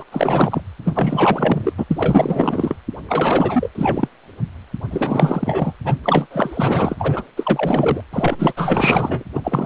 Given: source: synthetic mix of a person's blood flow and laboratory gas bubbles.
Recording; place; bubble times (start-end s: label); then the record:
Doppler ultrasound of blood flow; precordium
0.00-0.04 s: bubbles
0.11-0.61 s: bubbles
0.85-1.73 s: bubbles
1.77-1.85 s: bubbles
1.90-2.75 s: bubbles
3.08-3.69 s: bubbles
3.75-4.08 s: bubbles
4.90-5.74 s: bubbles
5.84-5.96 s: bubbles
6.04-6.26 s: bubbles
6.30-7.23 s: bubbles
7.37-8.02 s: bubbles
8.12-8.53 s: bubbles
8.56-9.23 s: bubbles
9.34-9.65 s: bubbles
From the record:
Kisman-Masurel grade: 444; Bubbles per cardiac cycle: continuous sound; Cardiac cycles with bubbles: 100%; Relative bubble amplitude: maximal (0.775 to 0.999); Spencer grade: 4 (maximum detectable bubble signal sounding continuously throughout systole and diastole of every cardiac period, and overriding the amplitude of the normal cardiac signals); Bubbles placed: anywhere in the cardiac cycle